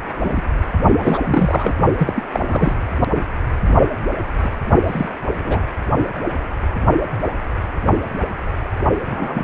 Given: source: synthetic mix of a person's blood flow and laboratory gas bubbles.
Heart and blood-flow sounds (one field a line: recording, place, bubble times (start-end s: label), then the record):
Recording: Doppler ultrasound of blood flow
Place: precordium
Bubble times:
0.18-0.41 s: bubbles
0.99-1.19 s: bubbles
1.24-1.72 s: bubbles
1.97-2.23 s: bubbles
2.33-2.81 s: bubbles
3.14-3.23 s: bubbles
3.61-3.75 s: bubbles
4.43-4.49 s: bubbles
4.87-5.09 s: bubbles
5.35-5.63 s: bubbles
9.05-9.44 s: bubbles
From the record:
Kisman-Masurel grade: 232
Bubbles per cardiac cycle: several, 3 to 8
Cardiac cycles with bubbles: 50 to 99%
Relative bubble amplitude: moderate (0.250 to 0.450)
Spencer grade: 3 (all of the cardiac periods contain showers or single bubble signals, but not dominating or overriding the cardiac motion signals)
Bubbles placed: only in the low amplitude regions of the cardiac cycle